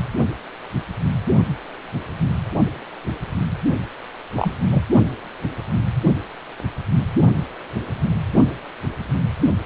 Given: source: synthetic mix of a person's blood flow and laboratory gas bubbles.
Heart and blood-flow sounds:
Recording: Doppler ultrasound of blood flow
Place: precordium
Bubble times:
4.36-4.55 s: bubbles
4.71-4.83 s: bubbles
From the record:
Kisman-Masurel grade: 212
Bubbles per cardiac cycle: several, 3 to 8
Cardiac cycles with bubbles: 1 to 10%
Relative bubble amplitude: moderate (0.250 to 0.450)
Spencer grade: 1 (occasional bubble signal discernible with the cardiac motion signal, with majority of cardiac periods free of bubbles)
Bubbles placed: only in the low amplitude regions of the cardiac cycle

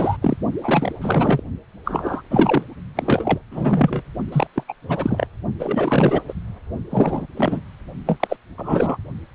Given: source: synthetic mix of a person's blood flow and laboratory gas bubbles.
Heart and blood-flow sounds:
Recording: Doppler ultrasound of blood flow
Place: precordium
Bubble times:
0.00-0.17 s: bubbles
0.22-0.37 s: bubbles
0.62-0.92 s: bubbles
1.01-1.43 s: bubbles
1.85-2.21 s: bubbles
2.30-2.63 s: bubbles
2.95-3.40 s: bubbles
3.51-4.03 s: bubbles
4.32-4.47 s: bubbles
4.55-4.64 s: bubbles
4.68-4.74 s: bubbles
4.88-5.27 s: bubbles
5.59-6.21 s: bubbles
6.28-6.33 s: bubbles
6.90-7.27 s: bubbles
7.36-7.62 s: bubbles
8.06-8.37 s: bubbles
8.57-8.97 s: bubbles
From the record:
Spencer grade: 3 (all of the cardiac periods contain showers or single bubble signals, but not dominating or overriding the cardiac motion signals)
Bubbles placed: only in the low amplitude regions of the cardiac cycle

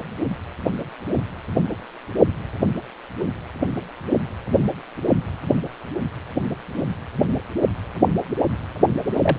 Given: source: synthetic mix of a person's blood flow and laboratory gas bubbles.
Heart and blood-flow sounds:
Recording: Doppler ultrasound of blood flow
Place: precordium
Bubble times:
9.12-9.38 s: bubbles
From the record:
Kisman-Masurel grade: 112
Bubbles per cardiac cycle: 1 to 2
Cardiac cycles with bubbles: 1 to 10%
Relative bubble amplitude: moderate (0.250 to 0.450)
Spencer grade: 1 (occasional bubble signal discernible with the cardiac motion signal, with majority of cardiac periods free of bubbles)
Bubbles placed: anywhere in the cardiac cycle

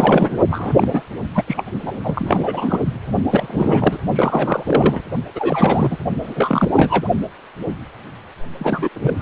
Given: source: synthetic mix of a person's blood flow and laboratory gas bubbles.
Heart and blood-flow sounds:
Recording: Doppler ultrasound of blood flow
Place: precordium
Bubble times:
0.00-0.37 s: bubbles
0.51-1.02 s: bubbles
1.34-1.44 s: bubbles
1.47-1.64 s: bubbles
1.84-1.92 s: bubbles
2.04-2.80 s: bubbles
3.30-4.00 s: bubbles
4.15-5.01 s: bubbles
5.35-5.97 s: bubbles
6.22-7.08 s: bubbles
8.59-8.89 s: bubbles
8.94-9.22 s: bubbles
From the record:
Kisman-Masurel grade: 333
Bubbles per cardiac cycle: rolling drumbeat, 9 or more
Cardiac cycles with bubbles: 50 to 99%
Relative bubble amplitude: loud (0.450 to 0.775)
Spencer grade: 3 (all of the cardiac periods contain showers or single bubble signals, but not dominating or overriding the cardiac motion signals)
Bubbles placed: only in the low amplitude regions of the cardiac cycle

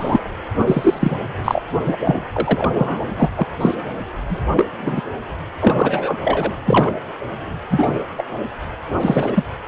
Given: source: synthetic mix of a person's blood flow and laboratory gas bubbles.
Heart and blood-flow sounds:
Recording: Doppler ultrasound of blood flow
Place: precordium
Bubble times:
0.00-0.20 s: bubbles
0.58-1.17 s: bubbles
1.45-1.62 s: bubbles
1.85-1.96 s: bubbles
2.04-2.26 s: bubbles
2.33-2.71 s: bubbles
2.74-3.04 s: bubbles
3.17-3.30 s: bubbles
3.37-3.47 s: bubbles
3.60-3.75 s: bubbles
4.29-4.41 s: bubbles
4.56-4.67 s: bubbles
4.81-5.01 s: bubbles
5.59-6.18 s: bubbles
6.25-6.52 s: bubbles
6.65-6.94 s: bubbles
7.70-8.03 s: bubbles
8.17-8.24 s: bubbles
9.00-9.43 s: bubbles
From the record:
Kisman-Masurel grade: 243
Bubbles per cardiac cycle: several, 3 to 8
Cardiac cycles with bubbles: 100%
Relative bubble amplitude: loud (0.450 to 0.775)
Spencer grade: 3 (all of the cardiac periods contain showers or single bubble signals, but not dominating or overriding the cardiac motion signals)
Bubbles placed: anywhere in the cardiac cycle

